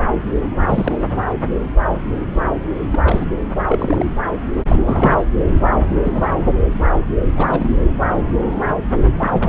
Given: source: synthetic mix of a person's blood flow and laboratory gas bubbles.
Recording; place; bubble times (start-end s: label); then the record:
Doppler ultrasound of blood flow; subclavian vein
0.59-1.07 s: bubbles
2.90-3.27 s: bubbles
3.67-4.06 s: bubbles
4.68-5.17 s: bubbles
5.88-5.96 s: bubbles
6.04-6.33 s: bubbles
7.36-7.79 s: bubbles
9.20-9.49 s: bubbles
From the record:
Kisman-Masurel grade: 232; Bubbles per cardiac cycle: several, 3 to 8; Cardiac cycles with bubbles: 50 to 99%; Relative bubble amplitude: moderate (0.250 to 0.450); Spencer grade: 3 (all of the cardiac periods contain showers or single bubble signals, but not dominating or overriding the cardiac motion signals); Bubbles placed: anywhere in the cardiac cycle